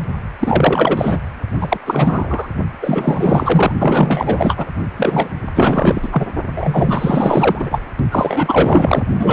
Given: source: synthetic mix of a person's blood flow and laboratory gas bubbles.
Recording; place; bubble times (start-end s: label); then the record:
Doppler ultrasound of blood flow; precordium
0.39-1.21 s: bubbles
1.60-1.77 s: bubbles
1.86-2.48 s: bubbles
2.81-3.72 s: bubbles
3.78-4.66 s: bubbles
4.97-5.29 s: bubbles
5.54-6.27 s: bubbles
6.49-7.79 s: bubbles
8.10-9.04 s: bubbles
9.18-9.33 s: bubbles
From the record:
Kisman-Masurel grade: 444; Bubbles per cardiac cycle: continuous sound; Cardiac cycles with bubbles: 100%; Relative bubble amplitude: maximal (0.775 to 0.999); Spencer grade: 4 (maximum detectable bubble signal sounding continuously throughout systole and diastole of every cardiac period, and overriding the amplitude of the normal cardiac signals); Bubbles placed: only in the low amplitude regions of the cardiac cycle